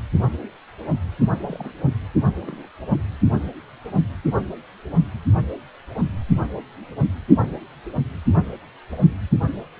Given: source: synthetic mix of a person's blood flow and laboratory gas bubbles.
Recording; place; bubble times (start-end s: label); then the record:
Doppler ultrasound of blood flow; precordium
1.43-1.70 s: bubbles
2.37-2.67 s: bubbles
7.46-7.57 s: bubbles
From the record:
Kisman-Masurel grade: 121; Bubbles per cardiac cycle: 1 to 2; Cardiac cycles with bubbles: 10 to 50%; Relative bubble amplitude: barely perceptible (0.100 to 0.250); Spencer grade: 2 (many but less than half of the cardiac periods contain bubble signals, singularly or in groups); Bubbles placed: only in the low amplitude regions of the cardiac cycle